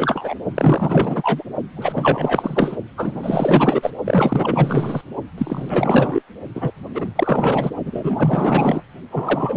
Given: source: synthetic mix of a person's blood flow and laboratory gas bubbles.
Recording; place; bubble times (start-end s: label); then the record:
Doppler ultrasound of blood flow; precordium
0.00-0.35 s: bubbles
0.56-1.44 s: bubbles
1.76-2.77 s: bubbles
2.96-3.91 s: bubbles
4.04-5.01 s: bubbles
5.38-6.22 s: bubbles
6.54-6.71 s: bubbles
6.94-7.06 s: bubbles
7.15-7.70 s: bubbles
7.84-8.81 s: bubbles
9.11-9.57 s: bubbles
From the record:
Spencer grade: 4 (maximum detectable bubble signal sounding continuously throughout systole and diastole of every cardiac period, and overriding the amplitude of the normal cardiac signals); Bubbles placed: only in the low amplitude regions of the cardiac cycle